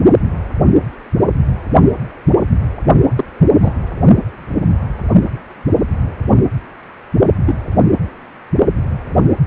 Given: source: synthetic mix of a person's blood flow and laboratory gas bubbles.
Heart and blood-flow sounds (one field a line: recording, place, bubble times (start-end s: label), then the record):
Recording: Doppler ultrasound of blood flow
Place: precordium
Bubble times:
3.15-3.24 s: bubbles
3.62-3.73 s: bubbles
7.46-7.55 s: bubbles
From the record:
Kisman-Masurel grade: 123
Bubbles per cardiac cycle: 1 to 2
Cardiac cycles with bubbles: 10 to 50%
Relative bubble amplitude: loud (0.450 to 0.775)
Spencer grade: 2 (many but less than half of the cardiac periods contain bubble signals, singularly or in groups)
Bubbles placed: only in the low amplitude regions of the cardiac cycle